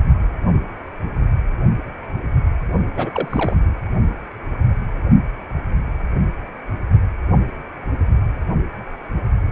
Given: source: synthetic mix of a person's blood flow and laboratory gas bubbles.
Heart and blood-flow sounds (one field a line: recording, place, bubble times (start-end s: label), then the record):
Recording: Doppler ultrasound of blood flow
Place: precordium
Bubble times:
2.97-3.57 s: bubbles
From the record:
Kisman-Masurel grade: 211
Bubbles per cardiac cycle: several, 3 to 8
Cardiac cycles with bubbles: 1 to 10%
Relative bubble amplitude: barely perceptible (0.100 to 0.250)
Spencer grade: 1 (occasional bubble signal discernible with the cardiac motion signal, with majority of cardiac periods free of bubbles)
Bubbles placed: only in the low amplitude regions of the cardiac cycle